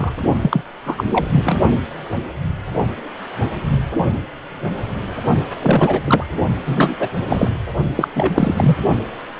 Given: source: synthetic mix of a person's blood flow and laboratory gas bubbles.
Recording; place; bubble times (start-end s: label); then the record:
Doppler ultrasound of blood flow; precordium
0.00-0.12 s: bubbles
0.41-0.61 s: bubbles
0.85-1.03 s: bubbles
1.10-1.57 s: bubbles
5.61-6.24 s: bubbles
6.66-6.95 s: bubbles
7.00-7.08 s: bubbles
7.29-7.50 s: bubbles
7.96-8.08 s: bubbles
8.15-8.76 s: bubbles
From the record:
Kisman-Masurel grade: 333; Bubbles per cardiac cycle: rolling drumbeat, 9 or more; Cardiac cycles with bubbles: 50 to 99%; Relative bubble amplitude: loud (0.450 to 0.775); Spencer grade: 3 (all of the cardiac periods contain showers or single bubble signals, but not dominating or overriding the cardiac motion signals); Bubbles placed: only in the low amplitude regions of the cardiac cycle